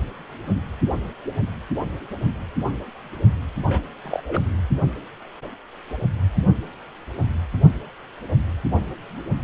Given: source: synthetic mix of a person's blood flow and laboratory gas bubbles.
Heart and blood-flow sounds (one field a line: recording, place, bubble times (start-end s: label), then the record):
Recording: Doppler ultrasound of blood flow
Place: precordium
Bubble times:
3.69-3.81 s: bubbles
4.04-4.21 s: bubbles
4.27-4.42 s: bubbles
From the record:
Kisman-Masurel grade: 221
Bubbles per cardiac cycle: several, 3 to 8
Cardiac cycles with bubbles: 10 to 50%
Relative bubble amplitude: barely perceptible (0.100 to 0.250)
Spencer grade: 2 (many but less than half of the cardiac periods contain bubble signals, singularly or in groups)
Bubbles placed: only in the low amplitude regions of the cardiac cycle